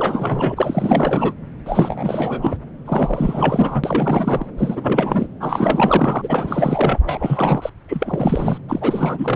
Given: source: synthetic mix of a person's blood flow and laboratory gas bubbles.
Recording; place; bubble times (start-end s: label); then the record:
Doppler ultrasound of blood flow; subclavian vein
0.00-1.33 s: bubbles
1.66-2.56 s: bubbles
2.85-4.46 s: bubbles
4.58-5.28 s: bubbles
5.40-7.00 s: bubbles
7.05-7.69 s: bubbles
7.88-8.58 s: bubbles
8.68-9.36 s: bubbles
From the record:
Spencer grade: 4 (maximum detectable bubble signal sounding continuously throughout systole and diastole of every cardiac period, and overriding the amplitude of the normal cardiac signals); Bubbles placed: anywhere in the cardiac cycle